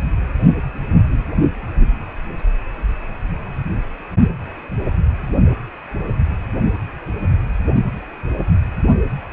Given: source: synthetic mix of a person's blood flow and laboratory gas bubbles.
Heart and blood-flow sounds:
Doppler ultrasound of blood flow; precordium
no bubbles
From the record:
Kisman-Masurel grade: 000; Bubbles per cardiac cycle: 0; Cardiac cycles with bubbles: 0%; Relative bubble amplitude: no bubbles discernible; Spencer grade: 0 (complete lack of bubble signals)

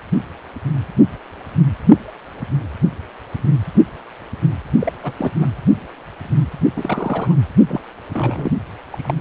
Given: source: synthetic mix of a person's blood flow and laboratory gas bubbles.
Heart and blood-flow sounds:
Doppler ultrasound of blood flow; precordium
4.80-4.92 s: bubbles
5.03-5.12 s: bubbles
5.17-5.31 s: bubbles
5.40-5.49 s: bubbles
6.76-7.35 s: bubbles
7.67-7.81 s: bubbles
8.12-8.52 s: bubbles
8.90-9.14 s: bubbles
From the record:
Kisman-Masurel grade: 222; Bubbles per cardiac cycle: several, 3 to 8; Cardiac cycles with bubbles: 10 to 50%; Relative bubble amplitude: moderate (0.250 to 0.450); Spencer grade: 2 (many but less than half of the cardiac periods contain bubble signals, singularly or in groups); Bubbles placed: only in the low amplitude regions of the cardiac cycle

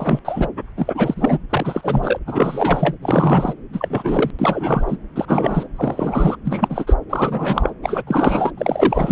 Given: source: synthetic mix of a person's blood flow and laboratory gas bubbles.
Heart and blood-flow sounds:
Doppler ultrasound of blood flow; subclavian vein
0.00-0.20 s: bubbles
0.25-0.49 s: bubbles
0.77-1.39 s: bubbles
1.50-2.19 s: bubbles
2.26-2.96 s: bubbles
3.01-3.53 s: bubbles
3.73-4.31 s: bubbles
4.39-4.96 s: bubbles
5.16-5.68 s: bubbles
5.77-6.37 s: bubbles
6.44-6.95 s: bubbles
7.10-7.75 s: bubbles
7.83-8.04 s: bubbles
8.06-8.51 s: bubbles
8.57-9.12 s: bubbles
From the record:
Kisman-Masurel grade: 343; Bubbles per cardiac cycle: rolling drumbeat, 9 or more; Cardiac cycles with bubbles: 100%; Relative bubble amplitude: loud (0.450 to 0.775); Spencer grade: 3 (all of the cardiac periods contain showers or single bubble signals, but not dominating or overriding the cardiac motion signals); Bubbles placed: anywhere in the cardiac cycle

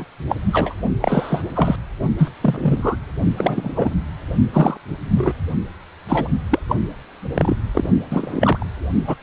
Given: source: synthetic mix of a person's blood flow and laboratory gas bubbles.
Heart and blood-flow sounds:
Doppler ultrasound of blood flow; precordium
0.00-0.04 s: bubbles
0.29-0.35 s: bubbles
0.53-0.74 s: bubbles
1.00-1.42 s: bubbles
1.55-1.76 s: bubbles
2.17-2.30 s: bubbles
2.40-2.97 s: bubbles
3.38-3.94 s: bubbles
4.53-4.77 s: bubbles
5.15-5.32 s: bubbles
6.08-6.28 s: bubbles
6.50-6.59 s: bubbles
6.68-6.76 s: bubbles
7.34-7.56 s: bubbles
7.75-7.89 s: bubbles
8.10-8.66 s: bubbles
9.06-9.15 s: bubbles
From the record:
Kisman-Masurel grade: 233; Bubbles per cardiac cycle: several, 3 to 8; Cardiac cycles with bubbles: 50 to 99%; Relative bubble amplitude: loud (0.450 to 0.775); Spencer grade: 3 (all of the cardiac periods contain showers or single bubble signals, but not dominating or overriding the cardiac motion signals); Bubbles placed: only in the low amplitude regions of the cardiac cycle

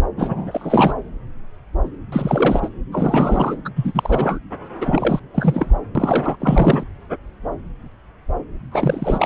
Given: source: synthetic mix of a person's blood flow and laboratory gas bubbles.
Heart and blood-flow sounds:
Doppler ultrasound of blood flow; subclavian vein
0.16-0.94 s: bubbles
2.12-2.70 s: bubbles
2.92-3.58 s: bubbles
3.65-3.69 s: bubbles
3.75-4.39 s: bubbles
4.81-5.20 s: bubbles
5.34-5.76 s: bubbles
5.95-6.36 s: bubbles
6.40-6.83 s: bubbles
8.71-9.26 s: bubbles
From the record:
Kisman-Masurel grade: 333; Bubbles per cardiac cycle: rolling drumbeat, 9 or more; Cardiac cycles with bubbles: 50 to 99%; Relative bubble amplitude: loud (0.450 to 0.775); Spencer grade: 3 (all of the cardiac periods contain showers or single bubble signals, but not dominating or overriding the cardiac motion signals); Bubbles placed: anywhere in the cardiac cycle

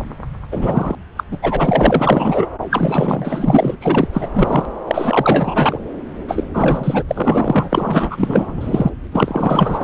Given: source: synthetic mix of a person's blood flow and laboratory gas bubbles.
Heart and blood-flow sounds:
Doppler ultrasound of blood flow; subclavian vein
0.52-0.95 s: bubbles
1.16-1.23 s: bubbles
1.31-1.38 s: bubbles
1.42-2.47 s: bubbles
2.71-3.76 s: bubbles
3.81-4.08 s: bubbles
4.12-4.29 s: bubbles
4.34-4.65 s: bubbles
4.87-5.79 s: bubbles
6.28-6.44 s: bubbles
6.54-7.04 s: bubbles
7.08-7.68 s: bubbles
7.72-8.91 s: bubbles
9.12-9.84 s: bubbles
From the record:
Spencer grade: 4 (maximum detectable bubble signal sounding continuously throughout systole and diastole of every cardiac period, and overriding the amplitude of the normal cardiac signals); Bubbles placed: anywhere in the cardiac cycle

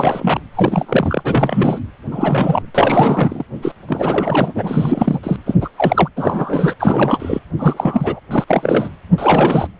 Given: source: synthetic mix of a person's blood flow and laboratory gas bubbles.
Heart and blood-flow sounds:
Doppler ultrasound of blood flow; precordium
0.00-0.41 s: bubbles
0.55-1.79 s: bubbles
2.11-2.71 s: bubbles
2.75-3.44 s: bubbles
3.62-3.73 s: bubbles
3.88-5.20 s: bubbles
5.23-5.36 s: bubbles
5.45-5.54 s: bubbles
5.61-5.69 s: bubbles
5.76-6.08 s: bubbles
6.16-6.74 s: bubbles
6.79-7.39 s: bubbles
7.57-8.20 s: bubbles
8.30-8.45 s: bubbles
8.47-8.89 s: bubbles
9.18-9.67 s: bubbles
From the record:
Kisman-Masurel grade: 343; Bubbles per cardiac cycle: rolling drumbeat, 9 or more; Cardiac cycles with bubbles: 100%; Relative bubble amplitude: loud (0.450 to 0.775); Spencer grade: 3 (all of the cardiac periods contain showers or single bubble signals, but not dominating or overriding the cardiac motion signals); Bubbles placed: anywhere in the cardiac cycle

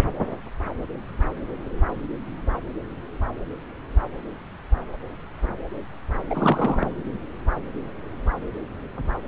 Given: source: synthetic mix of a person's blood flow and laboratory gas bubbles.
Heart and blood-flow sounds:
Doppler ultrasound of blood flow; subclavian vein
6.29-6.91 s: bubbles
From the record:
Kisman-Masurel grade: 212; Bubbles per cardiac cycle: several, 3 to 8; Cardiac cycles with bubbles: 1 to 10%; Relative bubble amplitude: moderate (0.250 to 0.450); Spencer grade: 1 (occasional bubble signal discernible with the cardiac motion signal, with majority of cardiac periods free of bubbles); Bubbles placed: anywhere in the cardiac cycle

